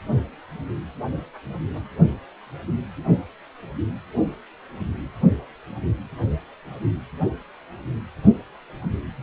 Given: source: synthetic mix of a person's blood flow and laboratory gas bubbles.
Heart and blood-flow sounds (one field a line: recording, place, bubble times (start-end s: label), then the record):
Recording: Doppler ultrasound of blood flow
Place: precordium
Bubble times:
no bubbles
From the record:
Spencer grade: 0 (complete lack of bubble signals)